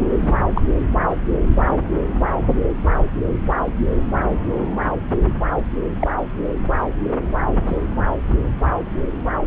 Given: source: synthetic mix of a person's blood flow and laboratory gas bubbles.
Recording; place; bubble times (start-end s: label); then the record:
Doppler ultrasound of blood flow; subclavian vein
0.00-0.04 s: bubbles
0.23-0.34 s: bubbles
0.54-0.61 s: bubbles
6.01-6.08 s: bubbles
7.67-7.78 s: bubbles
From the record:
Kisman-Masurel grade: 122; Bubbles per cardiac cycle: 1 to 2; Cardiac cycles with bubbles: 10 to 50%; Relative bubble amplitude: moderate (0.250 to 0.450); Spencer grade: 2 (many but less than half of the cardiac periods contain bubble signals, singularly or in groups); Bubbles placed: anywhere in the cardiac cycle